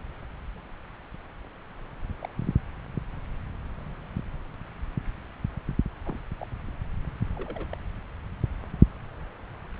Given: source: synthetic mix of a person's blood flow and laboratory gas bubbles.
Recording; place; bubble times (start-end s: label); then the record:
Doppler ultrasound of blood flow; subclavian vein
2.22-2.28 s: bubbles
6.03-6.17 s: bubbles
6.38-6.47 s: bubbles
7.36-7.66 s: bubbles
7.69-7.75 s: bubbles
From the record:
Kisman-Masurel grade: 121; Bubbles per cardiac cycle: 1 to 2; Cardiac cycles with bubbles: 10 to 50%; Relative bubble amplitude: barely perceptible (0.100 to 0.250); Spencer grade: 2 (many but less than half of the cardiac periods contain bubble signals, singularly or in groups); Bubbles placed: anywhere in the cardiac cycle